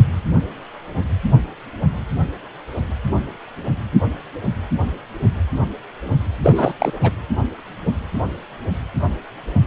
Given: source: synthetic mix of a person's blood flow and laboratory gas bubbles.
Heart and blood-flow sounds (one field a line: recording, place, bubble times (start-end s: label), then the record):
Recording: Doppler ultrasound of blood flow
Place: precordium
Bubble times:
6.43-6.72 s: bubbles
6.79-6.92 s: bubbles
7.02-7.11 s: bubbles
From the record:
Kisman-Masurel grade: 213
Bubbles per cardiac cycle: several, 3 to 8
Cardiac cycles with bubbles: 1 to 10%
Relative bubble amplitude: loud (0.450 to 0.775)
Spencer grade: 1 (occasional bubble signal discernible with the cardiac motion signal, with majority of cardiac periods free of bubbles)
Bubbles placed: anywhere in the cardiac cycle